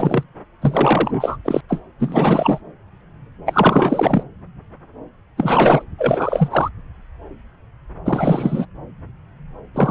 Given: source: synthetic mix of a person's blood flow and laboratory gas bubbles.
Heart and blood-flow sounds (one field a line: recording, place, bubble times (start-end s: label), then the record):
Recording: Doppler ultrasound of blood flow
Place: subclavian vein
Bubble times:
0.00-0.23 s: bubbles
0.61-1.37 s: bubbles
1.44-1.61 s: bubbles
1.69-1.80 s: bubbles
2.00-2.60 s: bubbles
3.46-4.24 s: bubbles
5.37-5.83 s: bubbles
5.98-6.69 s: bubbles
8.05-8.65 s: bubbles
9.74-9.91 s: bubbles
From the record:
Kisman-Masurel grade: 333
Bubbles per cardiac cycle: rolling drumbeat, 9 or more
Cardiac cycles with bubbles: 50 to 99%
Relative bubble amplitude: loud (0.450 to 0.775)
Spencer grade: 3 (all of the cardiac periods contain showers or single bubble signals, but not dominating or overriding the cardiac motion signals)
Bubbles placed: anywhere in the cardiac cycle